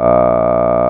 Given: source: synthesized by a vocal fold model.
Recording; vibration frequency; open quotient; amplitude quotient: sustained vowel; 60 Hz; 0.2; 1.4